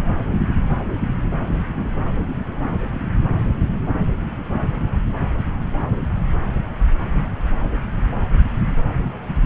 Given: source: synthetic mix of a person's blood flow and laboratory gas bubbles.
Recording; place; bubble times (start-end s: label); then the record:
Doppler ultrasound of blood flow; subclavian vein
no bubbles
From the record:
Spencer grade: 0 (complete lack of bubble signals)